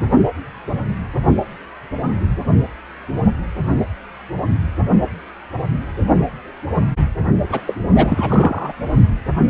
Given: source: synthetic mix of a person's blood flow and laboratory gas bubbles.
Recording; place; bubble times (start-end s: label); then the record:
Doppler ultrasound of blood flow; precordium
7.50-7.61 s: bubbles
7.66-7.77 s: bubbles
7.88-8.73 s: bubbles
From the record:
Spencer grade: 1 (occasional bubble signal discernible with the cardiac motion signal, with majority of cardiac periods free of bubbles); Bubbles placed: only in the low amplitude regions of the cardiac cycle